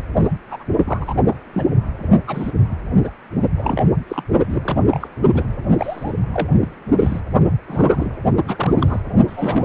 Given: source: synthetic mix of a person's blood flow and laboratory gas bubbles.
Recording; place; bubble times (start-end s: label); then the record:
Doppler ultrasound of blood flow; precordium
0.48-0.64 s: bubbles
0.77-1.14 s: bubbles
1.24-1.36 s: bubbles
1.53-1.67 s: bubbles
2.27-2.52 s: bubbles
3.04-3.10 s: bubbles
3.58-3.83 s: bubbles
4.08-4.23 s: bubbles
4.48-4.62 s: bubbles
4.64-4.81 s: bubbles
4.92-5.07 s: bubbles
5.33-5.44 s: bubbles
5.79-6.12 s: bubbles
6.33-6.47 s: bubbles
6.60-6.68 s: bubbles
6.98-7.20 s: bubbles
7.67-8.16 s: bubbles
8.45-8.73 s: bubbles
8.79-9.01 s: bubbles
9.28-9.65 s: bubbles
From the record:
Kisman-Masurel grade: 232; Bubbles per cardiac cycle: several, 3 to 8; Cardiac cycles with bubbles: 50 to 99%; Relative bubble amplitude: moderate (0.250 to 0.450); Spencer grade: 3 (all of the cardiac periods contain showers or single bubble signals, but not dominating or overriding the cardiac motion signals); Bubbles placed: only in the low amplitude regions of the cardiac cycle